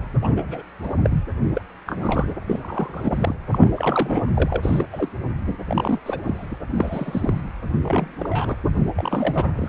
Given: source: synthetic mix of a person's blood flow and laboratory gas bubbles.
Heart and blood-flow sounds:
Doppler ultrasound of blood flow; precordium
0.21-0.62 s: bubbles
0.82-0.95 s: bubbles
1.02-1.23 s: bubbles
1.53-1.61 s: bubbles
1.86-2.34 s: bubbles
2.46-3.34 s: bubbles
3.52-3.70 s: bubbles
3.75-4.31 s: bubbles
4.34-4.57 s: bubbles
4.62-4.86 s: bubbles
4.93-5.09 s: bubbles
5.65-5.99 s: bubbles
6.06-6.59 s: bubbles
6.74-7.51 s: bubbles
7.84-8.16 s: bubbles
8.19-8.57 s: bubbles
8.95-9.53 s: bubbles
9.55-9.69 s: bubbles
From the record:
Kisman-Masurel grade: 242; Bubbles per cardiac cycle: several, 3 to 8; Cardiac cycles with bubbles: 100%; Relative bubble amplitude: moderate (0.250 to 0.450); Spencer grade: 3 (all of the cardiac periods contain showers or single bubble signals, but not dominating or overriding the cardiac motion signals); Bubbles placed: anywhere in the cardiac cycle

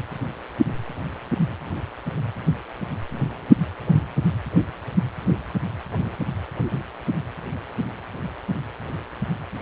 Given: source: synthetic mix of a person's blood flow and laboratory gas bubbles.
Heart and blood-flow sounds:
Doppler ultrasound of blood flow; precordium
no bubbles
From the record:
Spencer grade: 0 (complete lack of bubble signals)

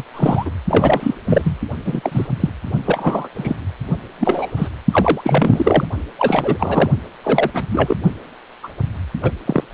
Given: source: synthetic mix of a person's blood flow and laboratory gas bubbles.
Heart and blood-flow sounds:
Doppler ultrasound of blood flow; precordium
0.00-0.04 s: bubbles
0.13-0.51 s: bubbles
0.68-1.15 s: bubbles
1.25-1.42 s: bubbles
1.45-1.60 s: bubbles
1.85-2.27 s: bubbles
2.40-2.49 s: bubbles
2.85-3.29 s: bubbles
3.35-3.56 s: bubbles
4.19-4.50 s: bubbles
4.56-4.68 s: bubbles
4.92-5.85 s: bubbles
6.18-6.91 s: bubbles
7.23-7.51 s: bubbles
7.54-7.64 s: bubbles
7.70-7.96 s: bubbles
8.63-8.68 s: bubbles
9.22-9.31 s: bubbles
9.46-9.63 s: bubbles
From the record:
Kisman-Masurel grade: 243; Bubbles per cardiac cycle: several, 3 to 8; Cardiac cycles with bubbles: 100%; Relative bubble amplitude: loud (0.450 to 0.775); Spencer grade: 3 (all of the cardiac periods contain showers or single bubble signals, but not dominating or overriding the cardiac motion signals); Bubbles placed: only in the low amplitude regions of the cardiac cycle

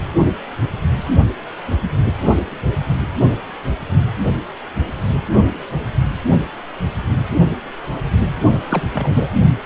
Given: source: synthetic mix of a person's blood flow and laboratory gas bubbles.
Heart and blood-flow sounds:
Doppler ultrasound of blood flow; precordium
8.69-8.83 s: bubbles
8.94-9.29 s: bubbles
From the record:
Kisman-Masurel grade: 222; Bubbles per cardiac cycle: several, 3 to 8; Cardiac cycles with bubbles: 10 to 50%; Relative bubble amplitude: moderate (0.250 to 0.450); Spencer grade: 2 (many but less than half of the cardiac periods contain bubble signals, singularly or in groups); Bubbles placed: only in the low amplitude regions of the cardiac cycle

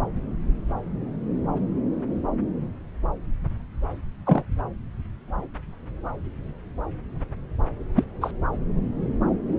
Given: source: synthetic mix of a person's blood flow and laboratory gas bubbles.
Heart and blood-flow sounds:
Doppler ultrasound of blood flow; subclavian vein
4.26-4.43 s: bubbles
7.96-8.04 s: bubbles
8.21-8.31 s: bubbles
From the record:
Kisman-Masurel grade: 122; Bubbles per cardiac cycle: 1 to 2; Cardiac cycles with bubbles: 10 to 50%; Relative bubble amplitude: moderate (0.250 to 0.450); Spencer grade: 2 (many but less than half of the cardiac periods contain bubble signals, singularly or in groups); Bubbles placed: anywhere in the cardiac cycle

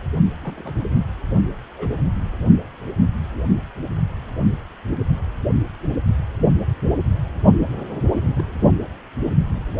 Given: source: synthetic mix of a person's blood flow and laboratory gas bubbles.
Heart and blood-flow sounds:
Doppler ultrasound of blood flow; precordium
0.41-0.74 s: bubbles
0.92-1.00 s: bubbles
1.77-1.90 s: bubbles
8.38-8.41 s: bubbles
From the record:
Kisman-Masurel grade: 121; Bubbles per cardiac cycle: 1 to 2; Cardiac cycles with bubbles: 10 to 50%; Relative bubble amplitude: barely perceptible (0.100 to 0.250); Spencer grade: 2 (many but less than half of the cardiac periods contain bubble signals, singularly or in groups); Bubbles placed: only in the low amplitude regions of the cardiac cycle

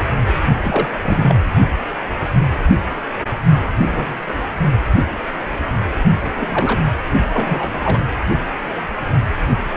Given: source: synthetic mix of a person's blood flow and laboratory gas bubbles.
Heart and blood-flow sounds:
Doppler ultrasound of blood flow; precordium
0.64-0.89 s: bubbles
1.02-1.40 s: bubbles
3.81-4.23 s: bubbles
4.28-4.33 s: bubbles
6.21-6.81 s: bubbles
7.33-7.71 s: bubbles
7.74-8.06 s: bubbles
From the record:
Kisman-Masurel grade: 232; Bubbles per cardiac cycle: several, 3 to 8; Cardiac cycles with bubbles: 50 to 99%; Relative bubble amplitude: moderate (0.250 to 0.450); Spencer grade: 3 (all of the cardiac periods contain showers or single bubble signals, but not dominating or overriding the cardiac motion signals); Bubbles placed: only in the low amplitude regions of the cardiac cycle

